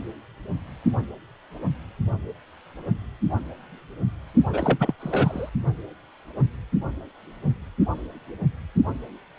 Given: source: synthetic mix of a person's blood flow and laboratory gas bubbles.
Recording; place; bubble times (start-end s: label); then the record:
Doppler ultrasound of blood flow; precordium
4.49-4.95 s: bubbles
5.00-5.50 s: bubbles
From the record:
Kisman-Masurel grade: 212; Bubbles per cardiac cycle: several, 3 to 8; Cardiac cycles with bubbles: 1 to 10%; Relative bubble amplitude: moderate (0.250 to 0.450); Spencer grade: 1 (occasional bubble signal discernible with the cardiac motion signal, with majority of cardiac periods free of bubbles); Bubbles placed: only in the low amplitude regions of the cardiac cycle